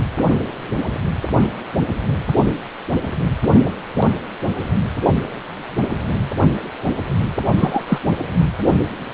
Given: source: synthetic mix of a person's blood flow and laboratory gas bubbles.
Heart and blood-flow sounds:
Doppler ultrasound of blood flow; precordium
7.57-7.82 s: bubbles
7.88-7.98 s: bubbles
8.66-8.76 s: bubbles
From the record:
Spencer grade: 2 (many but less than half of the cardiac periods contain bubble signals, singularly or in groups); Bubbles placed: anywhere in the cardiac cycle

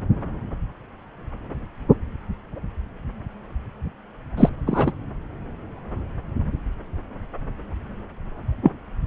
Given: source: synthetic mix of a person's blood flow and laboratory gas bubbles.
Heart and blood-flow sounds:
Doppler ultrasound of blood flow; subclavian vein
4.37-4.49 s: bubbles
4.67-4.92 s: bubbles
8.62-8.71 s: bubbles
From the record:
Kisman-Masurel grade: 113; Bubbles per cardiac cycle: 1 to 2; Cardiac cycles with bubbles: 1 to 10%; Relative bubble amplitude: loud (0.450 to 0.775); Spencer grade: 1 (occasional bubble signal discernible with the cardiac motion signal, with majority of cardiac periods free of bubbles); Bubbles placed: anywhere in the cardiac cycle

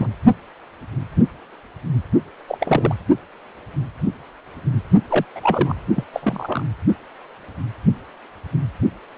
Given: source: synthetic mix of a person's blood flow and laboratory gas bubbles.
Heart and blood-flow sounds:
Doppler ultrasound of blood flow; precordium
0.00-0.07 s: bubbles
2.48-2.58 s: bubbles
2.60-2.95 s: bubbles
5.09-5.25 s: bubbles
5.35-5.81 s: bubbles
5.95-6.04 s: bubbles
6.13-6.65 s: bubbles
From the record:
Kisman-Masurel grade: 222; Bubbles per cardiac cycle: several, 3 to 8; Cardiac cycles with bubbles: 10 to 50%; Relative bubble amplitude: moderate (0.250 to 0.450); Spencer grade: 2 (many but less than half of the cardiac periods contain bubble signals, singularly or in groups); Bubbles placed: only in the low amplitude regions of the cardiac cycle

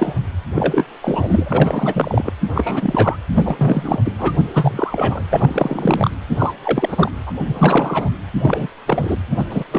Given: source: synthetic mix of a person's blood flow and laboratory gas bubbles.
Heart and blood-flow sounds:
Doppler ultrasound of blood flow; precordium
0.00-0.15 s: bubbles
0.55-0.86 s: bubbles
1.01-2.33 s: bubbles
2.55-3.17 s: bubbles
3.35-4.15 s: bubbles
4.18-4.34 s: bubbles
4.53-5.24 s: bubbles
5.30-6.10 s: bubbles
6.29-6.53 s: bubbles
6.63-7.11 s: bubbles
7.26-7.32 s: bubbles
7.46-8.09 s: bubbles
8.42-8.68 s: bubbles
8.87-9.17 s: bubbles
9.29-9.45 s: bubbles
9.50-9.64 s: bubbles
9.71-9.79 s: bubbles
From the record:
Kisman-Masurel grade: 343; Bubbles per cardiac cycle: rolling drumbeat, 9 or more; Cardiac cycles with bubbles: 100%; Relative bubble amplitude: loud (0.450 to 0.775); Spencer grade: 3 (all of the cardiac periods contain showers or single bubble signals, but not dominating or overriding the cardiac motion signals); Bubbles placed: anywhere in the cardiac cycle

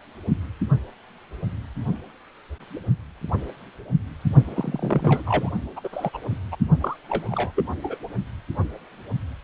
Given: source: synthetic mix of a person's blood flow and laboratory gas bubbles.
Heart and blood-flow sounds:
Doppler ultrasound of blood flow; precordium
4.45-5.24 s: bubbles
5.26-5.50 s: bubbles
5.75-5.81 s: bubbles
5.83-5.89 s: bubbles
5.92-6.09 s: bubbles
6.13-6.18 s: bubbles
6.30-6.37 s: bubbles
6.51-6.55 s: bubbles
6.80-6.96 s: bubbles
7.08-7.51 s: bubbles
7.55-7.64 s: bubbles
7.83-7.98 s: bubbles
From the record:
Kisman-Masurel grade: 222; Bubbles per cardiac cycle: several, 3 to 8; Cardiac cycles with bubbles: 10 to 50%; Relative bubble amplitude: moderate (0.250 to 0.450); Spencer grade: 2 (many but less than half of the cardiac periods contain bubble signals, singularly or in groups); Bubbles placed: only in the low amplitude regions of the cardiac cycle

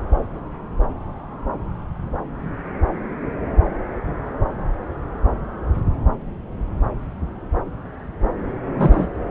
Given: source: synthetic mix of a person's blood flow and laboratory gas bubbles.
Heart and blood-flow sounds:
Doppler ultrasound of blood flow; subclavian vein
8.77-9.09 s: bubbles
From the record:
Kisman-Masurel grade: 212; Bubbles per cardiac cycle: several, 3 to 8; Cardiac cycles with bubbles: 1 to 10%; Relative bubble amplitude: moderate (0.250 to 0.450); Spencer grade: 1 (occasional bubble signal discernible with the cardiac motion signal, with majority of cardiac periods free of bubbles); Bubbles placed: anywhere in the cardiac cycle

